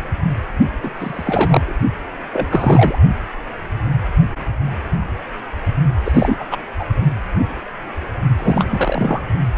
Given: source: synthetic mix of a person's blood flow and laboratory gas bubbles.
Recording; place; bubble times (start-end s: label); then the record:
Doppler ultrasound of blood flow; precordium
0.83-0.91 s: bubbles
1.01-1.75 s: bubbles
2.32-2.48 s: bubbles
2.50-2.98 s: bubbles
6.04-6.36 s: bubbles
6.39-6.45 s: bubbles
6.50-6.57 s: bubbles
6.78-6.84 s: bubbles
8.38-9.22 s: bubbles
From the record:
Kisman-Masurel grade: 333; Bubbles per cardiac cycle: rolling drumbeat, 9 or more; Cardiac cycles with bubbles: 50 to 99%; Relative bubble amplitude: loud (0.450 to 0.775); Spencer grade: 3 (all of the cardiac periods contain showers or single bubble signals, but not dominating or overriding the cardiac motion signals); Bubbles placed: only in the low amplitude regions of the cardiac cycle